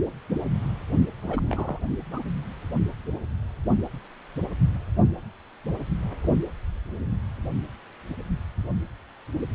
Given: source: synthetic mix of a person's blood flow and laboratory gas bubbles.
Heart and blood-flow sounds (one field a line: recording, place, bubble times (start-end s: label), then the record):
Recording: Doppler ultrasound of blood flow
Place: precordium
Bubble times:
1.23-1.79 s: bubbles
2.12-2.20 s: bubbles
From the record:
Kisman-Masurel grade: 211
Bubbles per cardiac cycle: several, 3 to 8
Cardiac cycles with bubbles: 1 to 10%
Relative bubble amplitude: barely perceptible (0.100 to 0.250)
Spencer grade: 1 (occasional bubble signal discernible with the cardiac motion signal, with majority of cardiac periods free of bubbles)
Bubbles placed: only in the low amplitude regions of the cardiac cycle